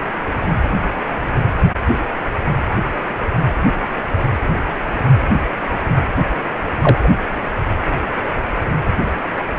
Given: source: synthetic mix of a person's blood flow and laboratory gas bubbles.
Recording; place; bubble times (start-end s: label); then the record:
Doppler ultrasound of blood flow; precordium
6.82-6.99 s: bubbles
7.02-7.10 s: bubbles
From the record:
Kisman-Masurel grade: 123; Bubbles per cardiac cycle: 1 to 2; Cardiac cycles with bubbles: 10 to 50%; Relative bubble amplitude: loud (0.450 to 0.775); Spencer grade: 2 (many but less than half of the cardiac periods contain bubble signals, singularly or in groups); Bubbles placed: anywhere in the cardiac cycle